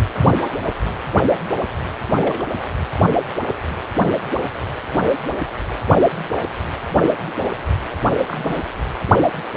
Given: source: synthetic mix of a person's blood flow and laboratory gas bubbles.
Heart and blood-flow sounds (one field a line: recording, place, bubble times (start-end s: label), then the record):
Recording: Doppler ultrasound of blood flow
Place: precordium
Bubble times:
2.17-2.44 s: bubbles
8.26-8.62 s: bubbles
From the record:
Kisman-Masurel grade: 121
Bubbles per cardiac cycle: 1 to 2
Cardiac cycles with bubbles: 10 to 50%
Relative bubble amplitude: barely perceptible (0.100 to 0.250)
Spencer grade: 2 (many but less than half of the cardiac periods contain bubble signals, singularly or in groups)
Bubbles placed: only in the low amplitude regions of the cardiac cycle